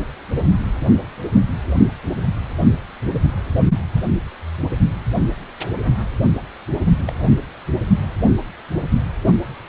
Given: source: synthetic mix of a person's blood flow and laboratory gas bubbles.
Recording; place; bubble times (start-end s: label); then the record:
Doppler ultrasound of blood flow; precordium
7.06-7.15 s: bubbles
From the record:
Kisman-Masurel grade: 121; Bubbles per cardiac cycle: 1 to 2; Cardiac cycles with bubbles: 10 to 50%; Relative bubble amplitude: barely perceptible (0.100 to 0.250); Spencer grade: 2 (many but less than half of the cardiac periods contain bubble signals, singularly or in groups); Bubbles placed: only in the low amplitude regions of the cardiac cycle